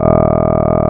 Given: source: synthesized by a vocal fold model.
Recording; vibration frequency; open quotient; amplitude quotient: sustained vowel; 40 Hz; 0.2; 1.1